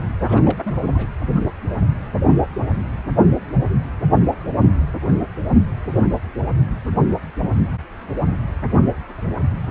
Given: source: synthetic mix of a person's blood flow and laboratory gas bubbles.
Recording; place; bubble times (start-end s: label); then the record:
Doppler ultrasound of blood flow; precordium
0.20-0.73 s: bubbles
0.85-0.89 s: bubbles
0.94-1.11 s: bubbles
From the record:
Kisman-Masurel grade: 221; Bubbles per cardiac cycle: several, 3 to 8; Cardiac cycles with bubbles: 10 to 50%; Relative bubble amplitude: barely perceptible (0.100 to 0.250); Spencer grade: 2 (many but less than half of the cardiac periods contain bubble signals, singularly or in groups); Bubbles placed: anywhere in the cardiac cycle